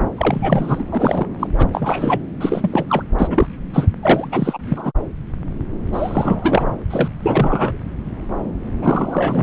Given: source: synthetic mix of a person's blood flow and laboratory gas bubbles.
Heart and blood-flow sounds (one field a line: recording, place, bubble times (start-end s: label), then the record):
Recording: Doppler ultrasound of blood flow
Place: subclavian vein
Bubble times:
0.17-0.84 s: bubbles
0.91-1.27 s: bubbles
1.40-1.47 s: bubbles
1.58-1.67 s: bubbles
1.73-2.21 s: bubbles
2.40-2.83 s: bubbles
2.89-3.02 s: bubbles
3.19-3.47 s: bubbles
3.73-3.87 s: bubbles
4.02-4.28 s: bubbles
4.32-4.58 s: bubbles
4.68-4.92 s: bubbles
5.92-6.72 s: bubbles
6.90-7.08 s: bubbles
7.21-7.77 s: bubbles
8.80-9.43 s: bubbles
From the record:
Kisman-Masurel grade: 333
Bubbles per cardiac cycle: rolling drumbeat, 9 or more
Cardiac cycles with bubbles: 50 to 99%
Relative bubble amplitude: loud (0.450 to 0.775)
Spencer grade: 3 (all of the cardiac periods contain showers or single bubble signals, but not dominating or overriding the cardiac motion signals)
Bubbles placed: anywhere in the cardiac cycle